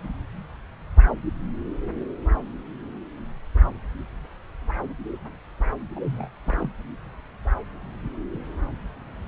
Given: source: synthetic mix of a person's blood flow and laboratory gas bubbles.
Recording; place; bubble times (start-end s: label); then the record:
Doppler ultrasound of blood flow; subclavian vein
5.96-5.99 s: bubbles
6.03-6.28 s: bubbles
6.46-6.70 s: bubbles
From the record:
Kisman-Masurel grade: 211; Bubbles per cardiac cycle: several, 3 to 8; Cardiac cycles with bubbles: 1 to 10%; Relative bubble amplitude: barely perceptible (0.100 to 0.250); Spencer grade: 1 (occasional bubble signal discernible with the cardiac motion signal, with majority of cardiac periods free of bubbles); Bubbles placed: anywhere in the cardiac cycle